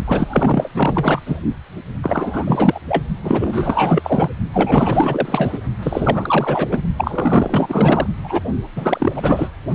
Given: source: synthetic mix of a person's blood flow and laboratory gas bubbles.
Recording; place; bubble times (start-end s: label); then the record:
Doppler ultrasound of blood flow; precordium
0.05-0.71 s: bubbles
0.73-1.22 s: bubbles
1.26-1.38 s: bubbles
2.02-2.79 s: bubbles
2.88-3.04 s: bubbles
3.23-4.28 s: bubbles
4.52-5.58 s: bubbles
5.82-6.81 s: bubbles
6.97-8.07 s: bubbles
8.23-8.41 s: bubbles
8.75-9.51 s: bubbles
From the record:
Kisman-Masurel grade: 444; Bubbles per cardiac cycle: continuous sound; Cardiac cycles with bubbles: 100%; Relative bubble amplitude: maximal (0.775 to 0.999); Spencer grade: 4 (maximum detectable bubble signal sounding continuously throughout systole and diastole of every cardiac period, and overriding the amplitude of the normal cardiac signals); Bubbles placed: only in the low amplitude regions of the cardiac cycle